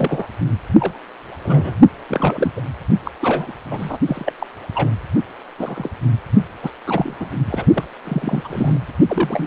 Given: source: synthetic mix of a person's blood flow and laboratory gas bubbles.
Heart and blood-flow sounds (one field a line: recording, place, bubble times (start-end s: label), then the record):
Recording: Doppler ultrasound of blood flow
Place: precordium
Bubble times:
0.00-0.28 s: bubbles
0.78-0.97 s: bubbles
1.42-1.75 s: bubbles
2.09-2.52 s: bubbles
2.56-2.62 s: bubbles
3.04-3.11 s: bubbles
3.21-3.52 s: bubbles
3.71-3.98 s: bubbles
4.05-4.32 s: bubbles
4.39-4.46 s: bubbles
4.74-4.89 s: bubbles
5.58-5.89 s: bubbles
6.62-6.71 s: bubbles
6.86-7.15 s: bubbles
7.19-7.28 s: bubbles
7.46-7.65 s: bubbles
7.73-7.84 s: bubbles
8.04-8.78 s: bubbles
9.07-9.46 s: bubbles
From the record:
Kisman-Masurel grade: 242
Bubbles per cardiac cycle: several, 3 to 8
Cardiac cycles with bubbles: 100%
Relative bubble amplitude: moderate (0.250 to 0.450)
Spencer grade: 3 (all of the cardiac periods contain showers or single bubble signals, but not dominating or overriding the cardiac motion signals)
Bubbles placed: only in the low amplitude regions of the cardiac cycle